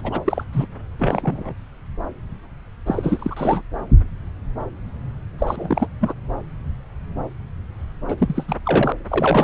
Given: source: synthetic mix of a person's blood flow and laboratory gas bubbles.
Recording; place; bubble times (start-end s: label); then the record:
Doppler ultrasound of blood flow; subclavian vein
0.04-0.20 s: bubbles
0.25-0.44 s: bubbles
0.52-0.66 s: bubbles
1.00-1.54 s: bubbles
2.86-3.62 s: bubbles
5.38-5.87 s: bubbles
6.00-6.14 s: bubbles
8.07-8.56 s: bubbles
8.65-8.93 s: bubbles
9.08-9.44 s: bubbles
From the record:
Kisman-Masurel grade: 332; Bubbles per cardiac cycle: rolling drumbeat, 9 or more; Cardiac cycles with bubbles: 50 to 99%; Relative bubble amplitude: moderate (0.250 to 0.450); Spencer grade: 3 (all of the cardiac periods contain showers or single bubble signals, but not dominating or overriding the cardiac motion signals); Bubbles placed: anywhere in the cardiac cycle